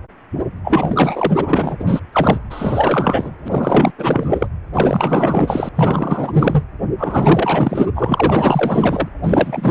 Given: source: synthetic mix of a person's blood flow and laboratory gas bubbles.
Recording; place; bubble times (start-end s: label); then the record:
Doppler ultrasound of blood flow; precordium
0.64-1.76 s: bubbles
1.79-2.00 s: bubbles
2.12-2.38 s: bubbles
2.50-3.31 s: bubbles
3.44-3.92 s: bubbles
3.98-4.46 s: bubbles
4.74-5.69 s: bubbles
5.75-6.64 s: bubbles
6.98-7.86 s: bubbles
7.95-9.09 s: bubbles
9.23-9.71 s: bubbles
From the record:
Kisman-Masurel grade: 444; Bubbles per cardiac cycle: continuous sound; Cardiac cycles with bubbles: 100%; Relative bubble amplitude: maximal (0.775 to 0.999); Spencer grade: 4 (maximum detectable bubble signal sounding continuously throughout systole and diastole of every cardiac period, and overriding the amplitude of the normal cardiac signals); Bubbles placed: anywhere in the cardiac cycle